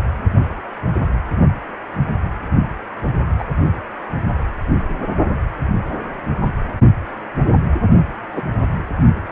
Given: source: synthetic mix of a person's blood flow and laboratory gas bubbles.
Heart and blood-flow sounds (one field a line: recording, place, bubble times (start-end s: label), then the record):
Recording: Doppler ultrasound of blood flow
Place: precordium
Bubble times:
3.38-3.44 s: bubbles
8.36-8.41 s: bubbles
From the record:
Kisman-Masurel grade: 123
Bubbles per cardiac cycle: 1 to 2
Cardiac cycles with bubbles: 10 to 50%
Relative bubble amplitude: loud (0.450 to 0.775)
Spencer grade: 2 (many but less than half of the cardiac periods contain bubble signals, singularly or in groups)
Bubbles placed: only in the low amplitude regions of the cardiac cycle